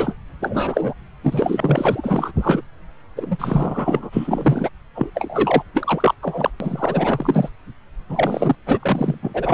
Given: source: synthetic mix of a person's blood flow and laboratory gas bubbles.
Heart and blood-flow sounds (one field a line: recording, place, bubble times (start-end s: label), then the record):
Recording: Doppler ultrasound of blood flow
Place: subclavian vein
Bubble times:
0.00-0.16 s: bubbles
0.40-0.93 s: bubbles
1.23-2.32 s: bubbles
2.35-2.61 s: bubbles
3.15-4.10 s: bubbles
4.12-4.70 s: bubbles
4.95-5.10 s: bubbles
5.15-5.63 s: bubbles
5.74-6.15 s: bubbles
6.23-6.50 s: bubbles
6.60-7.50 s: bubbles
8.09-8.55 s: bubbles
8.66-9.54 s: bubbles
From the record:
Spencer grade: 4 (maximum detectable bubble signal sounding continuously throughout systole and diastole of every cardiac period, and overriding the amplitude of the normal cardiac signals)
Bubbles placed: anywhere in the cardiac cycle